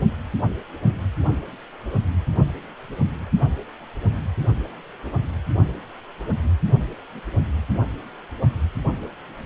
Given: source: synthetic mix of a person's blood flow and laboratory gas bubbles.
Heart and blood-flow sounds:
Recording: Doppler ultrasound of blood flow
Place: precordium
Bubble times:
no bubbles
From the record:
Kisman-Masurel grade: 000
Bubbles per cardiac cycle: 0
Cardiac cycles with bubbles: 0%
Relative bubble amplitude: no bubbles discernible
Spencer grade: 0 (complete lack of bubble signals)

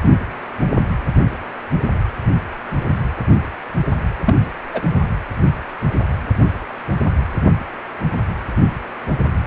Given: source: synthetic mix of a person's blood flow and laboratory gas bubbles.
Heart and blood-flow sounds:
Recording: Doppler ultrasound of blood flow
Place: precordium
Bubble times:
4.25-4.35 s: bubbles
4.74-4.82 s: bubbles
From the record:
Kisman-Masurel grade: 112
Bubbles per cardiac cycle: 1 to 2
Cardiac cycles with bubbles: 1 to 10%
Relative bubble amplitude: moderate (0.250 to 0.450)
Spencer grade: 1 (occasional bubble signal discernible with the cardiac motion signal, with majority of cardiac periods free of bubbles)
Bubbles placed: anywhere in the cardiac cycle

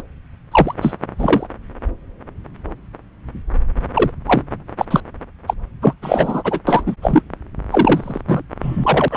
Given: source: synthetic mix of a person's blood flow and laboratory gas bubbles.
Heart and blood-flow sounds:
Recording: Doppler ultrasound of blood flow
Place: subclavian vein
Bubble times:
0.00-0.02 s: bubbles
0.51-0.74 s: bubbles
0.81-0.94 s: bubbles
1.18-1.46 s: bubbles
3.94-4.11 s: bubbles
4.26-4.42 s: bubbles
4.78-4.86 s: bubbles
4.91-5.00 s: bubbles
5.47-5.54 s: bubbles
5.82-5.94 s: bubbles
6.02-6.60 s: bubbles
6.67-6.83 s: bubbles
6.86-6.96 s: bubbles
7.02-7.22 s: bubbles
7.71-8.21 s: bubbles
8.28-8.42 s: bubbles
8.62-9.17 s: bubbles
From the record:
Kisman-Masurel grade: 233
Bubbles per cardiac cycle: several, 3 to 8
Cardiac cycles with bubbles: 50 to 99%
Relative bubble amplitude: loud (0.450 to 0.775)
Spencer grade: 3 (all of the cardiac periods contain showers or single bubble signals, but not dominating or overriding the cardiac motion signals)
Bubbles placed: anywhere in the cardiac cycle

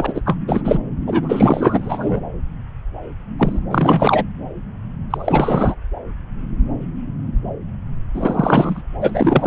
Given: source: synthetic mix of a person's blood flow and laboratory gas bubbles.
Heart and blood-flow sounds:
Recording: Doppler ultrasound of blood flow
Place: subclavian vein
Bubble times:
0.00-0.21 s: bubbles
0.25-0.37 s: bubbles
0.48-0.78 s: bubbles
1.06-2.20 s: bubbles
3.39-3.60 s: bubbles
3.69-4.24 s: bubbles
5.10-5.75 s: bubbles
8.13-8.82 s: bubbles
9.00-9.47 s: bubbles
From the record:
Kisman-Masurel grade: 333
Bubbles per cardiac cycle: rolling drumbeat, 9 or more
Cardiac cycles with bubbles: 50 to 99%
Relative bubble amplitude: loud (0.450 to 0.775)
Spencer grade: 3 (all of the cardiac periods contain showers or single bubble signals, but not dominating or overriding the cardiac motion signals)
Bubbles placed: anywhere in the cardiac cycle

